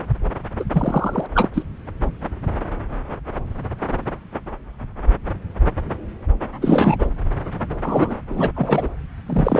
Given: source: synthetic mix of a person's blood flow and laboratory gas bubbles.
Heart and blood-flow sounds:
Doppler ultrasound of blood flow; subclavian vein
0.59-0.64 s: bubbles
0.72-1.26 s: bubbles
1.34-1.49 s: bubbles
1.53-1.62 s: bubbles
6.62-6.96 s: bubbles
6.99-7.08 s: bubbles
7.83-8.15 s: bubbles
8.30-8.51 s: bubbles
8.54-8.89 s: bubbles
9.26-9.60 s: bubbles
From the record:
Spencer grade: 2 (many but less than half of the cardiac periods contain bubble signals, singularly or in groups); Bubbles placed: anywhere in the cardiac cycle

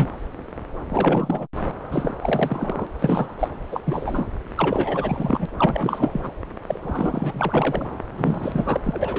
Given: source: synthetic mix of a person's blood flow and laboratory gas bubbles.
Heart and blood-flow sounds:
Doppler ultrasound of blood flow; subclavian vein
0.00-0.09 s: bubbles
0.88-1.47 s: bubbles
1.91-2.14 s: bubbles
2.21-2.87 s: bubbles
2.99-3.34 s: bubbles
3.39-3.48 s: bubbles
3.71-3.80 s: bubbles
3.84-4.27 s: bubbles
4.58-5.46 s: bubbles
5.58-6.31 s: bubbles
6.67-7.86 s: bubbles
8.17-8.78 s: bubbles
8.82-9.19 s: bubbles
From the record:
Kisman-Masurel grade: 332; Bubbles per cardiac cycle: rolling drumbeat, 9 or more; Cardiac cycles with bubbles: 50 to 99%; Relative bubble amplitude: moderate (0.250 to 0.450); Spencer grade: 3 (all of the cardiac periods contain showers or single bubble signals, but not dominating or overriding the cardiac motion signals); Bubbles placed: anywhere in the cardiac cycle

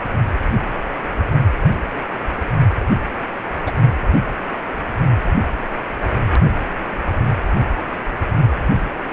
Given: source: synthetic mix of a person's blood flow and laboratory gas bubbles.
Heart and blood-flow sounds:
Doppler ultrasound of blood flow; precordium
3.66-3.71 s: bubbles
From the record:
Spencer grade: 2 (many but less than half of the cardiac periods contain bubble signals, singularly or in groups); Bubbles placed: anywhere in the cardiac cycle

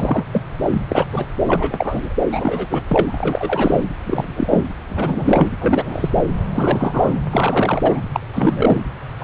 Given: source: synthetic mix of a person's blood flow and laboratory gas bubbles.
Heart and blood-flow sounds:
Doppler ultrasound of blood flow; subclavian vein
0.00-0.24 s: bubbles
0.32-0.41 s: bubbles
0.62-0.80 s: bubbles
0.89-1.05 s: bubbles
1.10-1.26 s: bubbles
1.47-2.13 s: bubbles
2.30-2.83 s: bubbles
2.89-3.19 s: bubbles
3.22-3.89 s: bubbles
4.04-4.66 s: bubbles
4.88-5.50 s: bubbles
5.60-6.10 s: bubbles
6.17-6.22 s: bubbles
6.54-7.20 s: bubbles
7.30-8.00 s: bubbles
8.13-8.20 s: bubbles
8.33-8.81 s: bubbles
9.19-9.24 s: bubbles
From the record:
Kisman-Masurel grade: 343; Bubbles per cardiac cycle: rolling drumbeat, 9 or more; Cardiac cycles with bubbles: 100%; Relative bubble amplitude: loud (0.450 to 0.775); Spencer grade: 3 (all of the cardiac periods contain showers or single bubble signals, but not dominating or overriding the cardiac motion signals); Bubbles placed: anywhere in the cardiac cycle

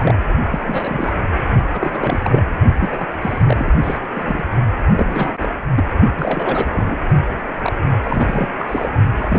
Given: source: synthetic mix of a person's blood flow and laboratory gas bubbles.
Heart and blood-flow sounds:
Doppler ultrasound of blood flow; precordium
0.00-0.15 s: bubbles
0.51-1.12 s: bubbles
1.73-2.43 s: bubbles
2.80-3.06 s: bubbles
3.21-3.44 s: bubbles
3.48-3.73 s: bubbles
3.82-3.99 s: bubbles
4.13-4.45 s: bubbles
4.96-5.37 s: bubbles
5.39-5.49 s: bubbles
5.75-5.84 s: bubbles
6.17-6.96 s: bubbles
7.55-7.87 s: bubbles
8.04-8.48 s: bubbles
8.59-8.89 s: bubbles
9.19-9.39 s: bubbles
From the record:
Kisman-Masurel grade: 342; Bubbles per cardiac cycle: rolling drumbeat, 9 or more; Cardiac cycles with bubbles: 100%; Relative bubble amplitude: moderate (0.250 to 0.450); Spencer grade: 3 (all of the cardiac periods contain showers or single bubble signals, but not dominating or overriding the cardiac motion signals); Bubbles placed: only in the low amplitude regions of the cardiac cycle

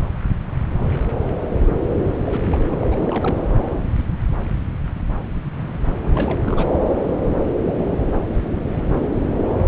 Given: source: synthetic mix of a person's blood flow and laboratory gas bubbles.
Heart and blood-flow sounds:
Doppler ultrasound of blood flow; subclavian vein
2.25-2.64 s: bubbles
2.71-2.77 s: bubbles
2.81-2.87 s: bubbles
2.90-3.44 s: bubbles
6.02-6.40 s: bubbles
6.44-6.75 s: bubbles
From the record:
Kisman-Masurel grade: 221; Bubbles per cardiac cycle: several, 3 to 8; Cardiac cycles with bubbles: 10 to 50%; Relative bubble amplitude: barely perceptible (0.100 to 0.250); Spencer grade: 2 (many but less than half of the cardiac periods contain bubble signals, singularly or in groups); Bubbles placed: anywhere in the cardiac cycle

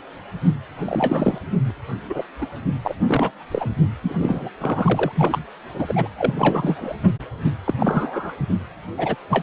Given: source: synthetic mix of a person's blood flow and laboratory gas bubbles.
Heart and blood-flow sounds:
Doppler ultrasound of blood flow; precordium
0.79-1.39 s: bubbles
1.68-1.71 s: bubbles
2.09-2.23 s: bubbles
2.41-2.46 s: bubbles
2.83-2.96 s: bubbles
3.06-3.31 s: bubbles
3.51-3.69 s: bubbles
4.03-4.15 s: bubbles
4.18-4.50 s: bubbles
4.60-5.12 s: bubbles
5.15-5.45 s: bubbles
5.74-6.10 s: bubbles
6.17-6.95 s: bubbles
7.03-7.10 s: bubbles
7.65-7.74 s: bubbles
7.79-8.33 s: bubbles
8.49-8.54 s: bubbles
8.97-9.16 s: bubbles
9.29-9.43 s: bubbles
From the record:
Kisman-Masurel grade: 243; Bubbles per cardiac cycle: several, 3 to 8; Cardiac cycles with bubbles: 100%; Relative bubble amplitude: loud (0.450 to 0.775); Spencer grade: 3 (all of the cardiac periods contain showers or single bubble signals, but not dominating or overriding the cardiac motion signals); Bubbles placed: anywhere in the cardiac cycle

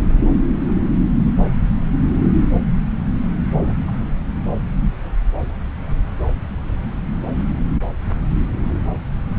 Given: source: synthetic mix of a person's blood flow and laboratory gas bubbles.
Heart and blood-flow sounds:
Doppler ultrasound of blood flow; subclavian vein
3.58-3.74 s: bubbles
3.88-3.92 s: bubbles
From the record:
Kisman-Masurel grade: 221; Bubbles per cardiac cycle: several, 3 to 8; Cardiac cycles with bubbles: 10 to 50%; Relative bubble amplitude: barely perceptible (0.100 to 0.250); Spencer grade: 2 (many but less than half of the cardiac periods contain bubble signals, singularly or in groups); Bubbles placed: anywhere in the cardiac cycle

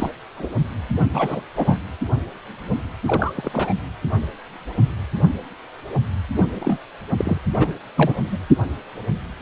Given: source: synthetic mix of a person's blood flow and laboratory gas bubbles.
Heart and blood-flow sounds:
Doppler ultrasound of blood flow; precordium
0.00-0.10 s: bubbles
0.36-0.47 s: bubbles
1.14-1.42 s: bubbles
1.56-1.76 s: bubbles
3.06-3.34 s: bubbles
3.37-3.50 s: bubbles
3.53-3.74 s: bubbles
6.36-6.44 s: bubbles
6.54-6.78 s: bubbles
7.18-7.39 s: bubbles
7.54-7.73 s: bubbles
7.96-8.15 s: bubbles
8.32-8.38 s: bubbles
From the record:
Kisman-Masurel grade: 232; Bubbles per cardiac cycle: several, 3 to 8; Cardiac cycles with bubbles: 50 to 99%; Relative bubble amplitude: moderate (0.250 to 0.450); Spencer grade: 3 (all of the cardiac periods contain showers or single bubble signals, but not dominating or overriding the cardiac motion signals); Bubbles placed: anywhere in the cardiac cycle

